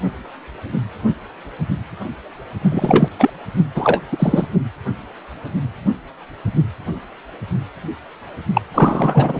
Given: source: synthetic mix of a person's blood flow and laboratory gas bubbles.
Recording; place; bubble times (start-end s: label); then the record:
Doppler ultrasound of blood flow; precordium
2.60-3.08 s: bubbles
3.19-3.29 s: bubbles
3.75-4.02 s: bubbles
4.12-4.47 s: bubbles
8.53-8.62 s: bubbles
8.74-9.39 s: bubbles
From the record:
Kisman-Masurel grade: 223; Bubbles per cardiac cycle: several, 3 to 8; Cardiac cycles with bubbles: 10 to 50%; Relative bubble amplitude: loud (0.450 to 0.775); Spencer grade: 2 (many but less than half of the cardiac periods contain bubble signals, singularly or in groups); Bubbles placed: only in the low amplitude regions of the cardiac cycle